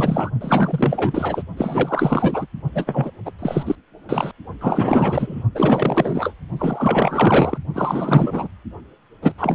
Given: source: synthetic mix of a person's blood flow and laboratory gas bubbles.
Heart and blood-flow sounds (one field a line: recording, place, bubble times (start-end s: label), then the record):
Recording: Doppler ultrasound of blood flow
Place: precordium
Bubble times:
0.00-0.30 s: bubbles
0.40-1.43 s: bubbles
1.57-2.47 s: bubbles
2.75-3.11 s: bubbles
3.25-3.32 s: bubbles
3.39-3.76 s: bubbles
4.08-4.31 s: bubbles
4.61-5.44 s: bubbles
5.54-6.33 s: bubbles
6.58-7.58 s: bubbles
7.73-8.48 s: bubbles
9.22-9.32 s: bubbles
9.38-9.55 s: bubbles
From the record:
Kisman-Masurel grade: 444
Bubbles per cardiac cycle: continuous sound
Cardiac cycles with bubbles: 100%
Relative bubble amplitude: maximal (0.775 to 0.999)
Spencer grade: 4 (maximum detectable bubble signal sounding continuously throughout systole and diastole of every cardiac period, and overriding the amplitude of the normal cardiac signals)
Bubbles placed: only in the low amplitude regions of the cardiac cycle